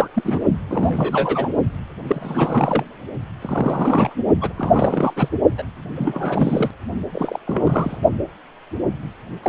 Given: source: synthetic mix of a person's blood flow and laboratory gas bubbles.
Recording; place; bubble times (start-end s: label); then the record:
Doppler ultrasound of blood flow; precordium
0.00-0.08 s: bubbles
0.14-0.39 s: bubbles
0.69-1.50 s: bubbles
2.06-2.84 s: bubbles
3.41-4.14 s: bubbles
4.41-4.53 s: bubbles
4.56-5.13 s: bubbles
5.16-5.29 s: bubbles
5.58-5.63 s: bubbles
5.96-6.71 s: bubbles
7.13-7.38 s: bubbles
7.46-7.97 s: bubbles
9.42-9.49 s: bubbles
From the record:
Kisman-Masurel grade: 332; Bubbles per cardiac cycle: rolling drumbeat, 9 or more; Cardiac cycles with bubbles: 50 to 99%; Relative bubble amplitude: moderate (0.250 to 0.450); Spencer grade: 3 (all of the cardiac periods contain showers or single bubble signals, but not dominating or overriding the cardiac motion signals); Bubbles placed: only in the low amplitude regions of the cardiac cycle